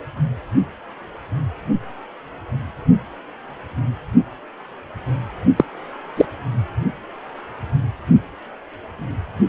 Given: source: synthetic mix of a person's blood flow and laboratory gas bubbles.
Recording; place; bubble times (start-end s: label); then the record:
Doppler ultrasound of blood flow; precordium
5.56-5.65 s: bubbles
6.17-6.25 s: bubbles
From the record:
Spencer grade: 1 (occasional bubble signal discernible with the cardiac motion signal, with majority of cardiac periods free of bubbles); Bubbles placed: only in the low amplitude regions of the cardiac cycle